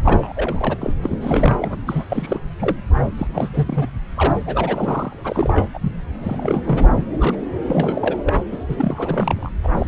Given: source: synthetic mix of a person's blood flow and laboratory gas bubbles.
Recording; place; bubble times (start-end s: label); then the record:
Doppler ultrasound of blood flow; subclavian vein
0.05-0.78 s: bubbles
0.81-0.93 s: bubbles
1.02-1.17 s: bubbles
1.21-1.56 s: bubbles
1.60-1.76 s: bubbles
1.85-2.05 s: bubbles
2.09-2.41 s: bubbles
2.59-2.76 s: bubbles
3.17-3.48 s: bubbles
3.53-3.89 s: bubbles
4.17-4.33 s: bubbles
4.46-5.21 s: bubbles
5.24-5.67 s: bubbles
5.74-5.92 s: bubbles
6.21-7.04 s: bubbles
7.17-7.38 s: bubbles
7.67-8.17 s: bubbles
8.26-8.34 s: bubbles
8.52-8.57 s: bubbles
8.69-9.50 s: bubbles
9.63-9.69 s: bubbles
9.78-9.88 s: bubbles
From the record:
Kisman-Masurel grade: 342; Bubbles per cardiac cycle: rolling drumbeat, 9 or more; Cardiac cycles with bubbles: 100%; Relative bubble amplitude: moderate (0.250 to 0.450); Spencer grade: 3 (all of the cardiac periods contain showers or single bubble signals, but not dominating or overriding the cardiac motion signals); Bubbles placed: anywhere in the cardiac cycle